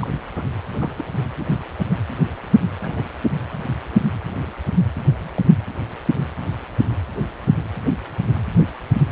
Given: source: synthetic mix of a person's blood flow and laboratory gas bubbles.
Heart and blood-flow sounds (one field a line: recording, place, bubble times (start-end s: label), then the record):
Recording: Doppler ultrasound of blood flow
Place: precordium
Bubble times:
0.00-0.08 s: bubbles
0.35-0.42 s: bubbles
0.79-0.92 s: bubbles
0.98-1.04 s: bubbles
2.81-3.05 s: bubbles
3.52-3.59 s: bubbles
4.94-5.42 s: bubbles
From the record:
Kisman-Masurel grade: 121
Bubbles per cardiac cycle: 1 to 2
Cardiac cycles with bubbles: 10 to 50%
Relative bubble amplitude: barely perceptible (0.100 to 0.250)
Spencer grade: 2 (many but less than half of the cardiac periods contain bubble signals, singularly or in groups)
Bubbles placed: anywhere in the cardiac cycle